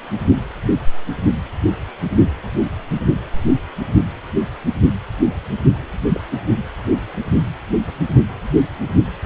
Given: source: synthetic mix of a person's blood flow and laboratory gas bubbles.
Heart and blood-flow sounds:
Doppler ultrasound of blood flow; precordium
6.05-6.21 s: bubbles
From the record:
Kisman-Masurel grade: 111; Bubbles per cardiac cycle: 1 to 2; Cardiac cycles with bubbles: 1 to 10%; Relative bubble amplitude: barely perceptible (0.100 to 0.250); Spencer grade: 1 (occasional bubble signal discernible with the cardiac motion signal, with majority of cardiac periods free of bubbles); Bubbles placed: only in the low amplitude regions of the cardiac cycle

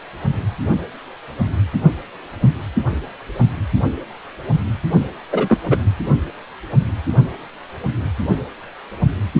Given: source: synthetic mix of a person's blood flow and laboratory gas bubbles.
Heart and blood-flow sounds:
Doppler ultrasound of blood flow; precordium
5.32-5.59 s: bubbles
5.69-5.77 s: bubbles
From the record:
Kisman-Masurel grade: 213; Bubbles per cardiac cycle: several, 3 to 8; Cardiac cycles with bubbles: 1 to 10%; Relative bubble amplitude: loud (0.450 to 0.775); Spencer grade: 1 (occasional bubble signal discernible with the cardiac motion signal, with majority of cardiac periods free of bubbles); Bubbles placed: only in the low amplitude regions of the cardiac cycle

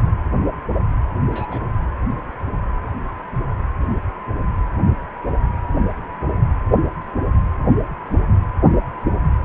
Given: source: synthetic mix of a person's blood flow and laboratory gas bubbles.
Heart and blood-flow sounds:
Doppler ultrasound of blood flow; precordium
1.32-1.59 s: bubbles
From the record:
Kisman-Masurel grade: 111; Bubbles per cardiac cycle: 1 to 2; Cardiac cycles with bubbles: 1 to 10%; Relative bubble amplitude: barely perceptible (0.100 to 0.250); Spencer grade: 1 (occasional bubble signal discernible with the cardiac motion signal, with majority of cardiac periods free of bubbles); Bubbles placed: anywhere in the cardiac cycle

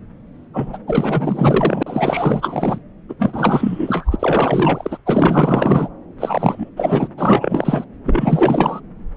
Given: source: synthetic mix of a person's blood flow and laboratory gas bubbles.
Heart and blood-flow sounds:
Doppler ultrasound of blood flow; subclavian vein
0.53-0.77 s: bubbles
0.87-1.83 s: bubbles
1.86-2.79 s: bubbles
3.09-3.14 s: bubbles
3.19-4.16 s: bubbles
4.19-4.98 s: bubbles
5.05-5.88 s: bubbles
6.18-6.70 s: bubbles
6.77-7.08 s: bubbles
7.17-7.85 s: bubbles
8.05-8.80 s: bubbles
From the record:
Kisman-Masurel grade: 444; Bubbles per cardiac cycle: continuous sound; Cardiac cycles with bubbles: 100%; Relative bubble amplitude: maximal (0.775 to 0.999); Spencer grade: 4 (maximum detectable bubble signal sounding continuously throughout systole and diastole of every cardiac period, and overriding the amplitude of the normal cardiac signals); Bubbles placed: anywhere in the cardiac cycle

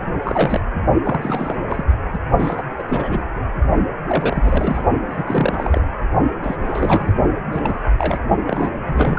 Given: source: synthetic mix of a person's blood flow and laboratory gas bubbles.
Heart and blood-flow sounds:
Doppler ultrasound of blood flow; precordium
0.11-0.60 s: bubbles
1.03-1.84 s: bubbles
2.13-2.19 s: bubbles
2.38-2.66 s: bubbles
2.79-2.84 s: bubbles
2.88-3.24 s: bubbles
4.07-4.85 s: bubbles
5.09-5.87 s: bubbles
6.42-6.56 s: bubbles
6.61-7.13 s: bubbles
7.44-7.91 s: bubbles
7.98-8.18 s: bubbles
8.46-8.71 s: bubbles
8.86-9.19 s: bubbles
From the record:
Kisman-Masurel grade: 342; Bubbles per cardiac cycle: rolling drumbeat, 9 or more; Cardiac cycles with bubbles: 100%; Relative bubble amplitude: moderate (0.250 to 0.450); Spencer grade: 3 (all of the cardiac periods contain showers or single bubble signals, but not dominating or overriding the cardiac motion signals); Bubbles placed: only in the low amplitude regions of the cardiac cycle

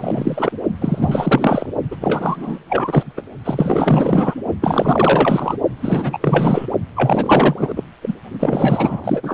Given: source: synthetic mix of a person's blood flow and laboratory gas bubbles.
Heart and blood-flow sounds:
Doppler ultrasound of blood flow; precordium
0.00-0.52 s: bubbles
0.81-1.66 s: bubbles
1.91-1.97 s: bubbles
2.00-2.58 s: bubbles
2.69-3.12 s: bubbles
3.17-3.22 s: bubbles
3.45-4.34 s: bubbles
4.61-5.56 s: bubbles
5.82-6.67 s: bubbles
6.96-7.84 s: bubbles
8.02-8.15 s: bubbles
8.40-9.01 s: bubbles
9.04-9.34 s: bubbles
From the record:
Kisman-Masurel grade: 444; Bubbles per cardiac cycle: continuous sound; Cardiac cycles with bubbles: 100%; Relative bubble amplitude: maximal (0.775 to 0.999); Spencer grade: 4 (maximum detectable bubble signal sounding continuously throughout systole and diastole of every cardiac period, and overriding the amplitude of the normal cardiac signals); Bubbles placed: only in the low amplitude regions of the cardiac cycle

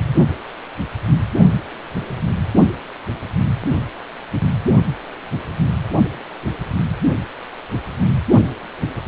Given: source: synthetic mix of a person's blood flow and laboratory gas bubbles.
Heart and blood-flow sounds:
Doppler ultrasound of blood flow; precordium
no bubbles
From the record:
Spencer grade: 0 (complete lack of bubble signals)

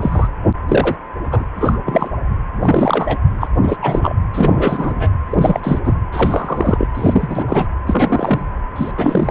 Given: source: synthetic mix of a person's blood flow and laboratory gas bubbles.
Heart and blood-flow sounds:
Doppler ultrasound of blood flow; precordium
0.01-0.29 s: bubbles
0.68-0.96 s: bubbles
1.31-1.44 s: bubbles
1.55-1.79 s: bubbles
1.85-2.08 s: bubbles
2.62-3.18 s: bubbles
3.40-3.48 s: bubbles
3.62-3.77 s: bubbles
3.82-4.16 s: bubbles
4.33-5.08 s: bubbles
5.30-5.60 s: bubbles
5.63-5.79 s: bubbles
5.84-5.93 s: bubbles
6.12-6.88 s: bubbles
6.95-7.45 s: bubbles
7.47-7.66 s: bubbles
7.87-8.44 s: bubbles
8.76-8.91 s: bubbles
8.97-9.31 s: bubbles
From the record:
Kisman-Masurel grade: 243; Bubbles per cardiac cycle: several, 3 to 8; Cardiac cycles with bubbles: 100%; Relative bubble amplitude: loud (0.450 to 0.775); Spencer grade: 3 (all of the cardiac periods contain showers or single bubble signals, but not dominating or overriding the cardiac motion signals); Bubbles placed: anywhere in the cardiac cycle

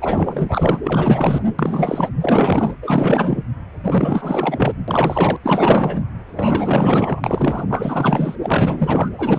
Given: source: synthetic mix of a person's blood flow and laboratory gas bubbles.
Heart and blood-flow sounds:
Doppler ultrasound of blood flow; precordium
0.00-0.80 s: bubbles
0.83-1.41 s: bubbles
1.59-2.09 s: bubbles
2.21-2.74 s: bubbles
2.81-3.43 s: bubbles
3.83-4.72 s: bubbles
4.88-5.36 s: bubbles
5.43-5.98 s: bubbles
6.27-7.21 s: bubbles
7.24-7.65 s: bubbles
7.70-8.36 s: bubbles
8.42-9.11 s: bubbles
9.18-9.39 s: bubbles
From the record:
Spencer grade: 4 (maximum detectable bubble signal sounding continuously throughout systole and diastole of every cardiac period, and overriding the amplitude of the normal cardiac signals); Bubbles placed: anywhere in the cardiac cycle

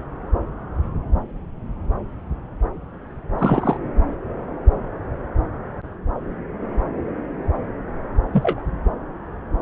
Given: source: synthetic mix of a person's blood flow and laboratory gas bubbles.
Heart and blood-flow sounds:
Doppler ultrasound of blood flow; subclavian vein
3.38-3.77 s: bubbles
8.32-8.62 s: bubbles
From the record:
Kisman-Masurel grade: 123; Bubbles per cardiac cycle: 1 to 2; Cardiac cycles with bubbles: 10 to 50%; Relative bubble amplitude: loud (0.450 to 0.775); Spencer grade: 2 (many but less than half of the cardiac periods contain bubble signals, singularly or in groups); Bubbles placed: anywhere in the cardiac cycle

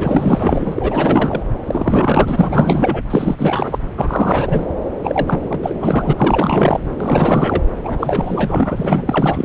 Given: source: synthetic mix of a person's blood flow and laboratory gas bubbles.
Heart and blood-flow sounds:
Doppler ultrasound of blood flow; subclavian vein
0.00-1.44 s: bubbles
1.65-3.02 s: bubbles
3.10-3.78 s: bubbles
3.97-4.66 s: bubbles
5.02-5.75 s: bubbles
5.79-6.13 s: bubbles
6.17-6.80 s: bubbles
7.00-7.64 s: bubbles
7.84-9.45 s: bubbles
From the record:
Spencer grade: 4 (maximum detectable bubble signal sounding continuously throughout systole and diastole of every cardiac period, and overriding the amplitude of the normal cardiac signals); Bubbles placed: anywhere in the cardiac cycle

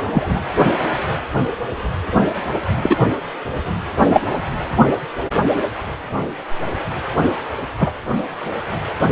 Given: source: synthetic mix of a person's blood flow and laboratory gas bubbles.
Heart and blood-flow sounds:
Doppler ultrasound of blood flow; precordium
0.12-0.40 s: bubbles
2.77-2.97 s: bubbles
4.12-4.21 s: bubbles
7.79-7.91 s: bubbles
From the record:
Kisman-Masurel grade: 123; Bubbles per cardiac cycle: 1 to 2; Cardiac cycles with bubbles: 10 to 50%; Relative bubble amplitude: loud (0.450 to 0.775); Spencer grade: 2 (many but less than half of the cardiac periods contain bubble signals, singularly or in groups); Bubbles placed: anywhere in the cardiac cycle

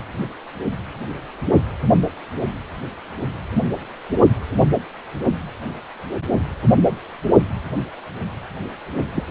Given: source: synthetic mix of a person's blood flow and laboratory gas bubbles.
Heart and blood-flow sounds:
Doppler ultrasound of blood flow; precordium
9.14-9.24 s: bubbles
From the record:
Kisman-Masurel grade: 112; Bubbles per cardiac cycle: 1 to 2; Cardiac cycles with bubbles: 1 to 10%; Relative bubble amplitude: moderate (0.250 to 0.450); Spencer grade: 1 (occasional bubble signal discernible with the cardiac motion signal, with majority of cardiac periods free of bubbles); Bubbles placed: only in the low amplitude regions of the cardiac cycle

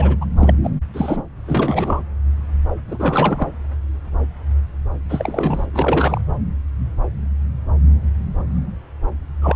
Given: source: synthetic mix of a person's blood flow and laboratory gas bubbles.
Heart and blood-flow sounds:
Doppler ultrasound of blood flow; subclavian vein
0.00-0.17 s: bubbles
0.21-0.25 s: bubbles
0.36-0.54 s: bubbles
0.63-0.70 s: bubbles
0.93-1.23 s: bubbles
1.46-2.01 s: bubbles
2.87-3.48 s: bubbles
5.09-5.67 s: bubbles
5.73-6.21 s: bubbles
9.41-9.56 s: bubbles
From the record:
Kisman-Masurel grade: 332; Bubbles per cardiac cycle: rolling drumbeat, 9 or more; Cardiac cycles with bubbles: 50 to 99%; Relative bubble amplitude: moderate (0.250 to 0.450); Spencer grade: 3 (all of the cardiac periods contain showers or single bubble signals, but not dominating or overriding the cardiac motion signals); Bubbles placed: anywhere in the cardiac cycle

